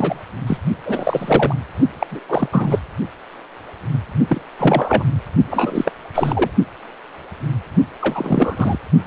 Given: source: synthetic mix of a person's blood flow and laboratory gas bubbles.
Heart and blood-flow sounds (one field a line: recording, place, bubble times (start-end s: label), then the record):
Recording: Doppler ultrasound of blood flow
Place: precordium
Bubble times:
0.00-0.22 s: bubbles
0.47-0.57 s: bubbles
0.85-1.55 s: bubbles
2.00-2.06 s: bubbles
2.11-2.20 s: bubbles
2.28-2.48 s: bubbles
2.52-2.79 s: bubbles
4.27-4.41 s: bubbles
4.58-5.04 s: bubbles
5.50-5.92 s: bubbles
6.14-6.50 s: bubbles
8.01-8.79 s: bubbles
From the record:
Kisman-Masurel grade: 333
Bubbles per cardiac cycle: rolling drumbeat, 9 or more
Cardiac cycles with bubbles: 50 to 99%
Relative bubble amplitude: loud (0.450 to 0.775)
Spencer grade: 3 (all of the cardiac periods contain showers or single bubble signals, but not dominating or overriding the cardiac motion signals)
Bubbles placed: only in the low amplitude regions of the cardiac cycle